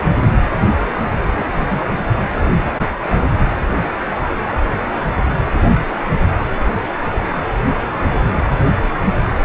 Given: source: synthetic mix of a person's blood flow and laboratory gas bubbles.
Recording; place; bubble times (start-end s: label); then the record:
Doppler ultrasound of blood flow; precordium
1.36-1.82 s: bubbles
From the record:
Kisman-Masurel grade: 111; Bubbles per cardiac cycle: 1 to 2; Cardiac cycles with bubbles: 1 to 10%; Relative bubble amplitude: barely perceptible (0.100 to 0.250); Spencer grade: 1 (occasional bubble signal discernible with the cardiac motion signal, with majority of cardiac periods free of bubbles); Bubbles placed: anywhere in the cardiac cycle